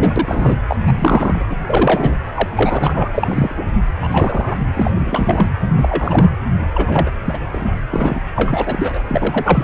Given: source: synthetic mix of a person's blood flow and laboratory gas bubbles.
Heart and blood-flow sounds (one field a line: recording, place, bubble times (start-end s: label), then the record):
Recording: Doppler ultrasound of blood flow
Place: precordium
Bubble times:
0.00-0.57 s: bubbles
0.67-0.76 s: bubbles
0.87-0.92 s: bubbles
0.94-1.46 s: bubbles
1.50-1.56 s: bubbles
1.66-2.15 s: bubbles
2.34-2.48 s: bubbles
2.53-3.09 s: bubbles
3.14-3.66 s: bubbles
4.01-4.57 s: bubbles
4.74-4.91 s: bubbles
4.94-5.49 s: bubbles
5.61-6.30 s: bubbles
6.74-7.10 s: bubbles
7.25-7.38 s: bubbles
7.53-7.72 s: bubbles
7.91-8.21 s: bubbles
8.36-9.02 s: bubbles
9.08-9.63 s: bubbles
From the record:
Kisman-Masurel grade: 342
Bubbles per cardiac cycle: rolling drumbeat, 9 or more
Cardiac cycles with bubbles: 100%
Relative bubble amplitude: moderate (0.250 to 0.450)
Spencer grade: 3 (all of the cardiac periods contain showers or single bubble signals, but not dominating or overriding the cardiac motion signals)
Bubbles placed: anywhere in the cardiac cycle